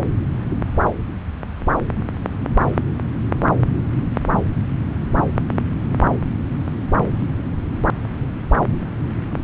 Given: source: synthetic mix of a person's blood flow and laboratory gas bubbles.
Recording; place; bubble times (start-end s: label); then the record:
Doppler ultrasound of blood flow; subclavian vein
no bubbles
From the record:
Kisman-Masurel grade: 000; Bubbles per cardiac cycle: 0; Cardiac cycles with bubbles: 0%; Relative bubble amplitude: no bubbles discernible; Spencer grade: 0 (complete lack of bubble signals)